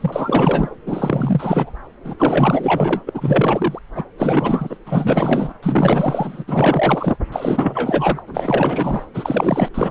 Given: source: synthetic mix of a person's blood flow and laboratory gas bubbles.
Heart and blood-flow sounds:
Doppler ultrasound of blood flow; subclavian vein
0.00-0.76 s: bubbles
0.86-1.73 s: bubbles
2.04-2.15 s: bubbles
2.18-3.02 s: bubbles
3.06-3.11 s: bubbles
3.14-3.79 s: bubbles
3.94-4.04 s: bubbles
4.18-4.78 s: bubbles
4.86-5.53 s: bubbles
5.62-6.45 s: bubbles
6.47-7.17 s: bubbles
7.32-8.22 s: bubbles
8.27-9.06 s: bubbles
9.14-9.69 s: bubbles
9.74-9.90 s: bubbles
From the record:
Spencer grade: 4 (maximum detectable bubble signal sounding continuously throughout systole and diastole of every cardiac period, and overriding the amplitude of the normal cardiac signals); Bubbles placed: anywhere in the cardiac cycle

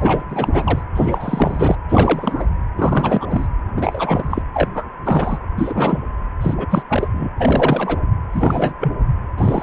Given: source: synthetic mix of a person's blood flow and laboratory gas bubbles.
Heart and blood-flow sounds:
Doppler ultrasound of blood flow; precordium
0.01-0.24 s: bubbles
0.29-0.84 s: bubbles
0.94-1.76 s: bubbles
1.89-2.46 s: bubbles
2.76-3.47 s: bubbles
3.77-4.42 s: bubbles
4.54-4.70 s: bubbles
4.74-4.85 s: bubbles
5.04-5.38 s: bubbles
5.56-6.00 s: bubbles
6.41-6.54 s: bubbles
6.57-6.66 s: bubbles
6.69-6.82 s: bubbles
6.89-7.09 s: bubbles
7.13-7.29 s: bubbles
7.37-8.00 s: bubbles
8.32-8.73 s: bubbles
8.80-8.94 s: bubbles
9.38-9.62 s: bubbles
From the record:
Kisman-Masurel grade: 343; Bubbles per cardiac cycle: rolling drumbeat, 9 or more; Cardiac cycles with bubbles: 100%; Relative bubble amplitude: loud (0.450 to 0.775); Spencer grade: 3 (all of the cardiac periods contain showers or single bubble signals, but not dominating or overriding the cardiac motion signals); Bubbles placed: anywhere in the cardiac cycle

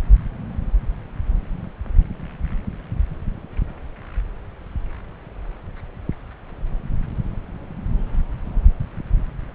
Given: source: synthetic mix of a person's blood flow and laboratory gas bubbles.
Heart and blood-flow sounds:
Doppler ultrasound of blood flow; subclavian vein
no bubbles
From the record:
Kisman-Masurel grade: 000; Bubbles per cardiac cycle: 0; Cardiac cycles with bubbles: 0%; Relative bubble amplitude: no bubbles discernible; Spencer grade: 0 (complete lack of bubble signals)

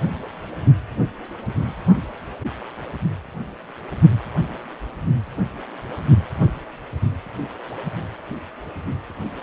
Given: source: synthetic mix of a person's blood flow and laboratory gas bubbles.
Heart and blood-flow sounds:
Doppler ultrasound of blood flow; precordium
8.29-8.36 s: bubbles
From the record:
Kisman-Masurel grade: 111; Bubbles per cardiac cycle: 1 to 2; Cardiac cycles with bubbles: 1 to 10%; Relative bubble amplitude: barely perceptible (0.100 to 0.250); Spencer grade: 1 (occasional bubble signal discernible with the cardiac motion signal, with majority of cardiac periods free of bubbles); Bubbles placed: anywhere in the cardiac cycle

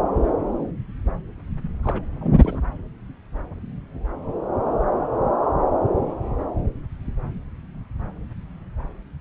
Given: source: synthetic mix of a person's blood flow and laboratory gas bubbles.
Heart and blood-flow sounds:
Doppler ultrasound of blood flow; subclavian vein
1.83-2.04 s: bubbles
2.21-2.58 s: bubbles
From the record:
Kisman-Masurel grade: 211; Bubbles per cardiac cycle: several, 3 to 8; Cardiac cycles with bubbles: 1 to 10%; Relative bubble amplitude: barely perceptible (0.100 to 0.250); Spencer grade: 1 (occasional bubble signal discernible with the cardiac motion signal, with majority of cardiac periods free of bubbles); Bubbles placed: anywhere in the cardiac cycle

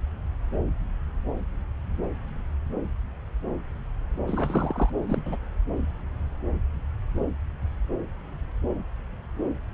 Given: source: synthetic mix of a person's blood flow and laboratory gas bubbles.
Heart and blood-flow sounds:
Doppler ultrasound of blood flow; subclavian vein
4.27-4.89 s: bubbles
5.06-5.22 s: bubbles
5.25-5.37 s: bubbles
From the record:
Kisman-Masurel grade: 211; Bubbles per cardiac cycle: several, 3 to 8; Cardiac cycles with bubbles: 1 to 10%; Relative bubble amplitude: barely perceptible (0.100 to 0.250); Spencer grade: 1 (occasional bubble signal discernible with the cardiac motion signal, with majority of cardiac periods free of bubbles); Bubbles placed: anywhere in the cardiac cycle

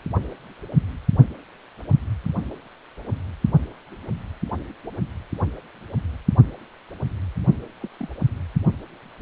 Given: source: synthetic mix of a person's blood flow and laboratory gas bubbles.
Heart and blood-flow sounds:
Doppler ultrasound of blood flow; precordium
7.82-7.88 s: bubbles
7.99-8.08 s: bubbles
From the record:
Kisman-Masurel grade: 111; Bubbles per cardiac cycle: 1 to 2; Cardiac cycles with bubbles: 1 to 10%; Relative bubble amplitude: barely perceptible (0.100 to 0.250); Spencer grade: 1 (occasional bubble signal discernible with the cardiac motion signal, with majority of cardiac periods free of bubbles); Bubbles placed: only in the low amplitude regions of the cardiac cycle

